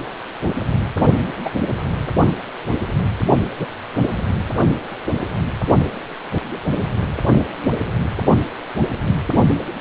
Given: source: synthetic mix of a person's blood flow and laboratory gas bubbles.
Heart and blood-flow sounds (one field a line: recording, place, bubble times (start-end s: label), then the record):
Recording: Doppler ultrasound of blood flow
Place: precordium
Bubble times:
1.44-1.49 s: bubbles
3.58-3.67 s: bubbles
From the record:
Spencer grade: 2 (many but less than half of the cardiac periods contain bubble signals, singularly or in groups)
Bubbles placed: only in the low amplitude regions of the cardiac cycle